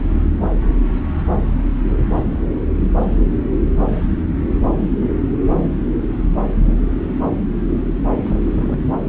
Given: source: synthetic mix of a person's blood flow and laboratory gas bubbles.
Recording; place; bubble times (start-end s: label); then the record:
Doppler ultrasound of blood flow; subclavian vein
8.24-8.79 s: bubbles
From the record:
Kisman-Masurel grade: 211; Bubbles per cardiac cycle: several, 3 to 8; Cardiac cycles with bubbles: 1 to 10%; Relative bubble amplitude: barely perceptible (0.100 to 0.250); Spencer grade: 1 (occasional bubble signal discernible with the cardiac motion signal, with majority of cardiac periods free of bubbles); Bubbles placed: anywhere in the cardiac cycle